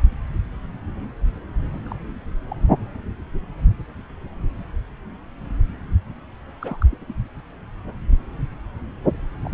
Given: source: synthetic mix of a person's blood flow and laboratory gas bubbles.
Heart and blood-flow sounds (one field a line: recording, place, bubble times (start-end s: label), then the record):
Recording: Doppler ultrasound of blood flow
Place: subclavian vein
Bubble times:
1.72-1.80 s: bubbles
1.84-1.95 s: bubbles
2.50-2.55 s: bubbles
6.61-6.86 s: bubbles
6.91-6.98 s: bubbles
7.01-7.04 s: bubbles
7.08-7.14 s: bubbles
9.44-9.51 s: bubbles
From the record:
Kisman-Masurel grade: 221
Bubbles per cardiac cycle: several, 3 to 8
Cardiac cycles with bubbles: 10 to 50%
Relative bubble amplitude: barely perceptible (0.100 to 0.250)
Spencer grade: 2 (many but less than half of the cardiac periods contain bubble signals, singularly or in groups)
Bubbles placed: anywhere in the cardiac cycle